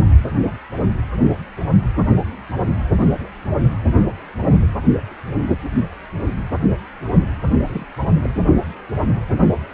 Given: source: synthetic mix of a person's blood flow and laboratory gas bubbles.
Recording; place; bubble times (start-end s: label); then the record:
Doppler ultrasound of blood flow; precordium
7.66-7.86 s: bubbles
8.22-8.29 s: bubbles
From the record:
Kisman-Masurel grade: 111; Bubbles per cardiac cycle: 1 to 2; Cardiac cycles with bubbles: 1 to 10%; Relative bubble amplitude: barely perceptible (0.100 to 0.250); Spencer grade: 1 (occasional bubble signal discernible with the cardiac motion signal, with majority of cardiac periods free of bubbles); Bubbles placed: anywhere in the cardiac cycle